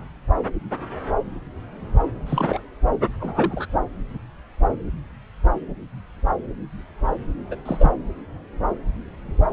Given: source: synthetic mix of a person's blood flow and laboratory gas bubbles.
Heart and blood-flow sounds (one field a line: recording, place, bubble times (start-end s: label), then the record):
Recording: Doppler ultrasound of blood flow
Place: subclavian vein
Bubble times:
2.27-2.66 s: bubbles
3.20-3.66 s: bubbles
7.51-7.55 s: bubbles
7.65-7.91 s: bubbles
From the record:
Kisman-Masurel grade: 222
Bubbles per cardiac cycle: several, 3 to 8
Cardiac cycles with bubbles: 10 to 50%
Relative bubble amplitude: moderate (0.250 to 0.450)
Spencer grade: 2 (many but less than half of the cardiac periods contain bubble signals, singularly or in groups)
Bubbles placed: anywhere in the cardiac cycle